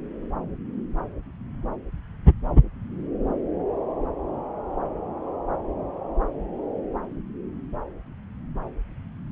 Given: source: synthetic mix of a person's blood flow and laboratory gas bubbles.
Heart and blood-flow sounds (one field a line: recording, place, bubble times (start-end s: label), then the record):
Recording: Doppler ultrasound of blood flow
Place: subclavian vein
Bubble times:
no bubbles
From the record:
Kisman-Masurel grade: 000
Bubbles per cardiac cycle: 0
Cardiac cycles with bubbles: 0%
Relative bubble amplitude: no bubbles discernible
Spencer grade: 0 (complete lack of bubble signals)